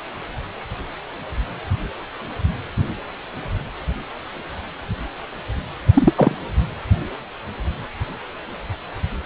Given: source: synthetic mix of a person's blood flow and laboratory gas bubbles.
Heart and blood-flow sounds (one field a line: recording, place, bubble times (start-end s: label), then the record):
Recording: Doppler ultrasound of blood flow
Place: precordium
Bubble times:
5.93-6.13 s: bubbles
6.15-6.35 s: bubbles
From the record:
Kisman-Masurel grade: 113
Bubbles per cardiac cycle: 1 to 2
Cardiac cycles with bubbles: 1 to 10%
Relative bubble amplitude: loud (0.450 to 0.775)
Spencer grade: 1 (occasional bubble signal discernible with the cardiac motion signal, with majority of cardiac periods free of bubbles)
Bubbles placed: anywhere in the cardiac cycle